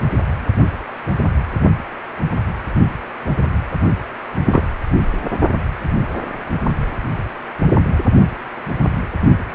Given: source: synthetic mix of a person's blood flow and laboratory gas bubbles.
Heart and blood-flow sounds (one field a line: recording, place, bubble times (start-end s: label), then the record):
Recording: Doppler ultrasound of blood flow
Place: precordium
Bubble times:
4.46-4.60 s: bubbles
From the record:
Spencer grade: 1 (occasional bubble signal discernible with the cardiac motion signal, with majority of cardiac periods free of bubbles)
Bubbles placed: only in the low amplitude regions of the cardiac cycle